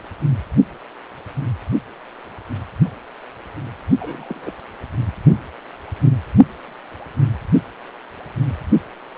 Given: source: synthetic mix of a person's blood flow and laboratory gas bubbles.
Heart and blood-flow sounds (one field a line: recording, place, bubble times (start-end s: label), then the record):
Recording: Doppler ultrasound of blood flow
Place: precordium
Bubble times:
4.00-4.52 s: bubbles
From the record:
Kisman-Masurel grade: 111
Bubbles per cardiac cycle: 1 to 2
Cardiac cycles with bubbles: 1 to 10%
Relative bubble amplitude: barely perceptible (0.100 to 0.250)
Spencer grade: 1 (occasional bubble signal discernible with the cardiac motion signal, with majority of cardiac periods free of bubbles)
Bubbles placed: only in the low amplitude regions of the cardiac cycle